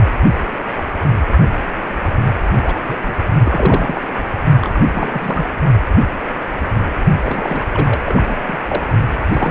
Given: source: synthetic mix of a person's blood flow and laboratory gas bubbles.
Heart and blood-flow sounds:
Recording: Doppler ultrasound of blood flow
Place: precordium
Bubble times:
2.63-2.75 s: bubbles
2.83-3.12 s: bubbles
3.44-4.06 s: bubbles
4.08-4.23 s: bubbles
4.61-4.80 s: bubbles
4.94-5.46 s: bubbles
7.21-7.66 s: bubbles
7.71-8.42 s: bubbles
8.47-8.57 s: bubbles
8.68-8.82 s: bubbles
9.31-9.51 s: bubbles
From the record:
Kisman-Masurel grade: 332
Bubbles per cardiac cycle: rolling drumbeat, 9 or more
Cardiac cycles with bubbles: 50 to 99%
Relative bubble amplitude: moderate (0.250 to 0.450)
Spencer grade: 3 (all of the cardiac periods contain showers or single bubble signals, but not dominating or overriding the cardiac motion signals)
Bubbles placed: only in the low amplitude regions of the cardiac cycle

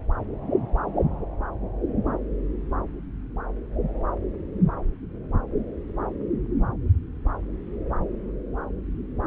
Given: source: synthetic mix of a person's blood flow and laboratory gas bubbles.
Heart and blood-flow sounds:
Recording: Doppler ultrasound of blood flow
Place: subclavian vein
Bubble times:
no bubbles
From the record:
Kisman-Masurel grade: 000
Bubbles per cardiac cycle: 0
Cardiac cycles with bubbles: 0%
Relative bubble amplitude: no bubbles discernible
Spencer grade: 0 (complete lack of bubble signals)

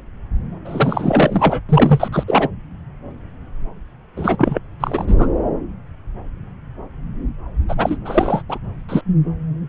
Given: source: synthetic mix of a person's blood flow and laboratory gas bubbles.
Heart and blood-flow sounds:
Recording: Doppler ultrasound of blood flow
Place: subclavian vein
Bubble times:
0.65-1.60 s: bubbles
1.69-2.08 s: bubbles
2.12-2.23 s: bubbles
2.27-2.48 s: bubbles
4.16-4.58 s: bubbles
4.80-5.15 s: bubbles
5.19-5.28 s: bubbles
7.69-7.97 s: bubbles
8.04-8.42 s: bubbles
8.48-8.58 s: bubbles
8.88-9.01 s: bubbles
From the record:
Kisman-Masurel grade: 333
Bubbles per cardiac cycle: rolling drumbeat, 9 or more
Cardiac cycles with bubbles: 50 to 99%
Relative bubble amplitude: loud (0.450 to 0.775)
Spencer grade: 3 (all of the cardiac periods contain showers or single bubble signals, but not dominating or overriding the cardiac motion signals)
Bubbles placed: anywhere in the cardiac cycle

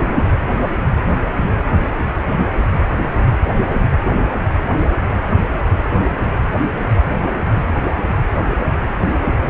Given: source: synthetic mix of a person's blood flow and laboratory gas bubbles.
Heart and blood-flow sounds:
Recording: Doppler ultrasound of blood flow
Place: precordium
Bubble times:
no bubbles
From the record:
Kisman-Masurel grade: 000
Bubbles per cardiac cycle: 0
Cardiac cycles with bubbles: 0%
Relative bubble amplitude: no bubbles discernible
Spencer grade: 0 (complete lack of bubble signals)

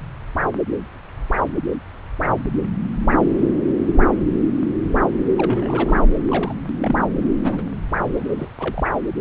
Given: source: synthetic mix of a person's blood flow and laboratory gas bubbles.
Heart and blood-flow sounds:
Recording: Doppler ultrasound of blood flow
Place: subclavian vein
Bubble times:
5.36-6.06 s: bubbles
6.29-6.54 s: bubbles
6.80-6.96 s: bubbles
7.42-7.62 s: bubbles
8.12-8.50 s: bubbles
8.60-8.84 s: bubbles
From the record:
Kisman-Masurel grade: 221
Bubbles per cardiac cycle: several, 3 to 8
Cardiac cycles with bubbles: 10 to 50%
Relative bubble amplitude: barely perceptible (0.100 to 0.250)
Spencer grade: 2 (many but less than half of the cardiac periods contain bubble signals, singularly or in groups)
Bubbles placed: anywhere in the cardiac cycle

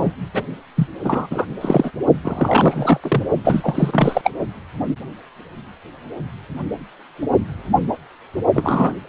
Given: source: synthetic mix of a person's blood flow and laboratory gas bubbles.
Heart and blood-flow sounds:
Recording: Doppler ultrasound of blood flow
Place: precordium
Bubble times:
0.00-0.14 s: bubbles
0.33-0.43 s: bubbles
0.76-0.88 s: bubbles
1.03-1.27 s: bubbles
1.30-1.46 s: bubbles
1.61-1.92 s: bubbles
2.23-3.00 s: bubbles
3.04-3.23 s: bubbles
3.44-4.30 s: bubbles
8.54-8.94 s: bubbles
From the record:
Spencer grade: 3 (all of the cardiac periods contain showers or single bubble signals, but not dominating or overriding the cardiac motion signals)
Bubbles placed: only in the low amplitude regions of the cardiac cycle

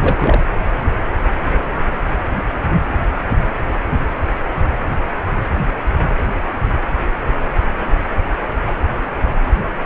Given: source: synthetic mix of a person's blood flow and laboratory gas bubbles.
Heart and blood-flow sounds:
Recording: Doppler ultrasound of blood flow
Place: precordium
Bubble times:
0.01-0.42 s: bubbles
From the record:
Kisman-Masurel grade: 212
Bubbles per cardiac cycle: several, 3 to 8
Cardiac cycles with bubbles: 1 to 10%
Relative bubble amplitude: moderate (0.250 to 0.450)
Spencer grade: 1 (occasional bubble signal discernible with the cardiac motion signal, with majority of cardiac periods free of bubbles)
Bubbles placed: anywhere in the cardiac cycle

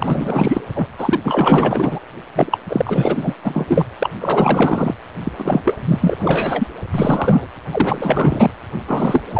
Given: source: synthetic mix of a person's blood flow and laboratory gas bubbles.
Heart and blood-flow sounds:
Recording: Doppler ultrasound of blood flow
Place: precordium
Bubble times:
0.00-0.61 s: bubbles
0.74-0.88 s: bubbles
0.98-1.20 s: bubbles
1.24-2.00 s: bubbles
2.35-2.59 s: bubbles
2.69-3.35 s: bubbles
3.43-3.65 s: bubbles
3.67-3.85 s: bubbles
3.99-4.10 s: bubbles
4.20-4.95 s: bubbles
5.24-5.32 s: bubbles
5.37-5.76 s: bubbles
5.88-6.16 s: bubbles
6.19-6.67 s: bubbles
6.94-7.47 s: bubbles
7.72-8.51 s: bubbles
8.87-9.23 s: bubbles
9.26-9.40 s: bubbles
From the record:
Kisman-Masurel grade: 444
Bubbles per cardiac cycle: continuous sound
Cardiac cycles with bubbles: 100%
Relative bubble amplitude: maximal (0.775 to 0.999)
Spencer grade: 4 (maximum detectable bubble signal sounding continuously throughout systole and diastole of every cardiac period, and overriding the amplitude of the normal cardiac signals)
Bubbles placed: anywhere in the cardiac cycle

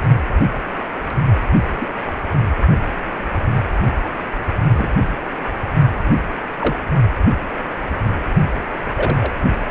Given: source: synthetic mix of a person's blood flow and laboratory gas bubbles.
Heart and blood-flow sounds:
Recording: Doppler ultrasound of blood flow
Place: precordium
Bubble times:
1.73-1.88 s: bubbles
4.70-4.92 s: bubbles
6.59-6.76 s: bubbles
8.96-9.31 s: bubbles
From the record:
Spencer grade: 2 (many but less than half of the cardiac periods contain bubble signals, singularly or in groups)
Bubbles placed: only in the low amplitude regions of the cardiac cycle

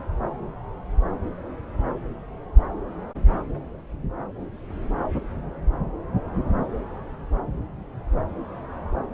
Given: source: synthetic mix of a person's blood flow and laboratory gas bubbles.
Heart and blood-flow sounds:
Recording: Doppler ultrasound of blood flow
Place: subclavian vein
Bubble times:
no bubbles
From the record:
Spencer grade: 0 (complete lack of bubble signals)

